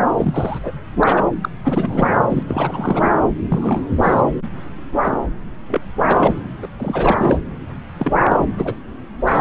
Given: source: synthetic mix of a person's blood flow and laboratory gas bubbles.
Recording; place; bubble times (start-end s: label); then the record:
Doppler ultrasound of blood flow; subclavian vein
0.17-0.59 s: bubbles
0.63-0.72 s: bubbles
1.00-1.24 s: bubbles
1.42-1.49 s: bubbles
1.64-2.19 s: bubbles
2.29-2.43 s: bubbles
2.48-3.12 s: bubbles
3.49-3.90 s: bubbles
3.96-4.21 s: bubbles
5.01-5.17 s: bubbles
5.67-5.81 s: bubbles
6.07-6.35 s: bubbles
6.61-6.67 s: bubbles
6.79-7.38 s: bubbles
7.99-8.45 s: bubbles
8.58-8.75 s: bubbles
9.27-9.41 s: bubbles
From the record:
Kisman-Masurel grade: 342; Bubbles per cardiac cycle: rolling drumbeat, 9 or more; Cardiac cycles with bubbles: 100%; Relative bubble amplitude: moderate (0.250 to 0.450); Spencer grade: 3 (all of the cardiac periods contain showers or single bubble signals, but not dominating or overriding the cardiac motion signals); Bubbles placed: anywhere in the cardiac cycle